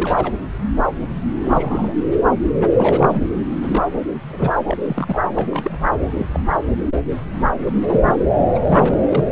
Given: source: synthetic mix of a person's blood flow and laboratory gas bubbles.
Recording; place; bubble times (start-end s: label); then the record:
Doppler ultrasound of blood flow; subclavian vein
0.00-0.33 s: bubbles
1.42-1.95 s: bubbles
2.70-3.22 s: bubbles
3.37-3.46 s: bubbles
3.52-3.83 s: bubbles
4.15-4.21 s: bubbles
4.29-4.53 s: bubbles
4.67-4.78 s: bubbles
4.85-5.20 s: bubbles
5.35-5.71 s: bubbles
6.15-6.26 s: bubbles
6.33-6.40 s: bubbles
7.67-7.73 s: bubbles
7.88-8.14 s: bubbles
8.54-8.60 s: bubbles
8.63-8.96 s: bubbles
9.03-9.26 s: bubbles
From the record:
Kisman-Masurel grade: 232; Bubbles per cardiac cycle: several, 3 to 8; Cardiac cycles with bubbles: 50 to 99%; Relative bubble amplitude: moderate (0.250 to 0.450); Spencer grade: 3 (all of the cardiac periods contain showers or single bubble signals, but not dominating or overriding the cardiac motion signals); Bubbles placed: anywhere in the cardiac cycle